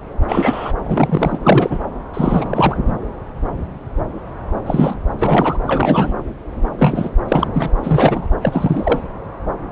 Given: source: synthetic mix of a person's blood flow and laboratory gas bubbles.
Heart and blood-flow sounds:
Doppler ultrasound of blood flow; subclavian vein
0.28-0.72 s: bubbles
0.83-1.38 s: bubbles
1.44-1.79 s: bubbles
2.14-2.77 s: bubbles
2.87-2.93 s: bubbles
4.66-4.95 s: bubbles
5.19-5.58 s: bubbles
5.67-6.12 s: bubbles
6.79-7.11 s: bubbles
7.28-7.47 s: bubbles
7.54-7.70 s: bubbles
7.83-8.28 s: bubbles
8.43-9.01 s: bubbles
From the record:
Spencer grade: 3 (all of the cardiac periods contain showers or single bubble signals, but not dominating or overriding the cardiac motion signals); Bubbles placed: anywhere in the cardiac cycle

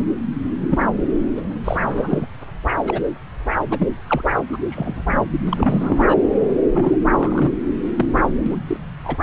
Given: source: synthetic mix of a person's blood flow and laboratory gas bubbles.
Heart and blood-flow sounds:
Doppler ultrasound of blood flow; subclavian vein
0.61-0.67 s: bubbles
0.70-0.85 s: bubbles
1.36-1.42 s: bubbles
1.64-2.27 s: bubbles
2.83-3.02 s: bubbles
3.70-3.88 s: bubbles
4.07-4.24 s: bubbles
4.52-4.58 s: bubbles
4.69-5.03 s: bubbles
5.50-6.16 s: bubbles
6.74-6.96 s: bubbles
7.09-7.51 s: bubbles
7.96-8.06 s: bubbles
8.46-8.55 s: bubbles
8.67-8.77 s: bubbles
9.04-9.17 s: bubbles
From the record:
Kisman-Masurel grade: 242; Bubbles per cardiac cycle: several, 3 to 8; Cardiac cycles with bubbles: 100%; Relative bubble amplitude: moderate (0.250 to 0.450); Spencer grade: 3 (all of the cardiac periods contain showers or single bubble signals, but not dominating or overriding the cardiac motion signals); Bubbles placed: anywhere in the cardiac cycle

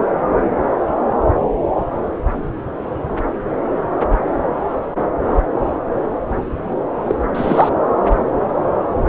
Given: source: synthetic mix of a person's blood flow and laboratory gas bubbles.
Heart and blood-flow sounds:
Doppler ultrasound of blood flow; subclavian vein
7.05-7.15 s: bubbles
7.34-7.70 s: bubbles
From the record:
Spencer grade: 1 (occasional bubble signal discernible with the cardiac motion signal, with majority of cardiac periods free of bubbles); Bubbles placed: anywhere in the cardiac cycle

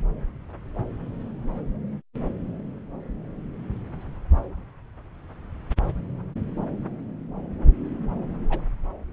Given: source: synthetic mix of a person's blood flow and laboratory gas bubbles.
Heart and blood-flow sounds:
Doppler ultrasound of blood flow; subclavian vein
8.49-8.65 s: bubbles
From the record:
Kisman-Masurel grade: 112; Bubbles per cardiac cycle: 1 to 2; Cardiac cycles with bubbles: 1 to 10%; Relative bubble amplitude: moderate (0.250 to 0.450); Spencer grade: 1 (occasional bubble signal discernible with the cardiac motion signal, with majority of cardiac periods free of bubbles); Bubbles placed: anywhere in the cardiac cycle

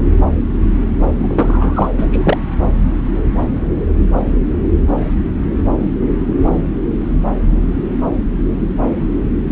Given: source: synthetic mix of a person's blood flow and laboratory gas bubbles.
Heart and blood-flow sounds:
Doppler ultrasound of blood flow; subclavian vein
1.17-1.90 s: bubbles
1.98-2.06 s: bubbles
2.11-2.38 s: bubbles
From the record:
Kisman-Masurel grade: 213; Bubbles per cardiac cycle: several, 3 to 8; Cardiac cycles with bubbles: 1 to 10%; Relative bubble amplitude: loud (0.450 to 0.775); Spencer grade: 1 (occasional bubble signal discernible with the cardiac motion signal, with majority of cardiac periods free of bubbles); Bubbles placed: anywhere in the cardiac cycle

